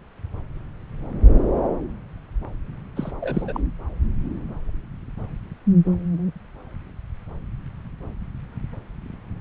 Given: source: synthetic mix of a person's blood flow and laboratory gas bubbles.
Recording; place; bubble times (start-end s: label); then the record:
Doppler ultrasound of blood flow; subclavian vein
2.96-3.11 s: bubbles
3.20-3.60 s: bubbles
From the record:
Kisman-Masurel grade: 222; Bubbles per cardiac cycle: several, 3 to 8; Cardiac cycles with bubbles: 10 to 50%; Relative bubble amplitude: moderate (0.250 to 0.450); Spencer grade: 2 (many but less than half of the cardiac periods contain bubble signals, singularly or in groups); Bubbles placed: anywhere in the cardiac cycle